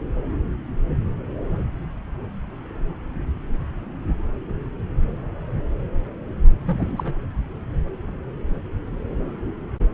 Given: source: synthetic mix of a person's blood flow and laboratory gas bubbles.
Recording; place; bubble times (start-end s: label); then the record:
Doppler ultrasound of blood flow; subclavian vein
6.65-7.13 s: bubbles
From the record:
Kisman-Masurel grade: 211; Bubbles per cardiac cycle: several, 3 to 8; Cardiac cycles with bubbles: 1 to 10%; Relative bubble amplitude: barely perceptible (0.100 to 0.250); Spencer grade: 1 (occasional bubble signal discernible with the cardiac motion signal, with majority of cardiac periods free of bubbles); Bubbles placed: anywhere in the cardiac cycle